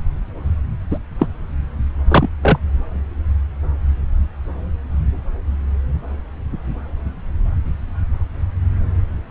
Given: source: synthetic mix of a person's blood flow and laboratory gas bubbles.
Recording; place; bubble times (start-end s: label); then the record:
Doppler ultrasound of blood flow; subclavian vein
0.91-0.98 s: bubbles
1.19-1.27 s: bubbles
2.08-2.29 s: bubbles
2.42-2.58 s: bubbles
From the record:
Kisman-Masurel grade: 123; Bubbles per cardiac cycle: 1 to 2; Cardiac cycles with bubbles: 10 to 50%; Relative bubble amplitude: loud (0.450 to 0.775); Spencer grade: 2 (many but less than half of the cardiac periods contain bubble signals, singularly or in groups); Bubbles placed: anywhere in the cardiac cycle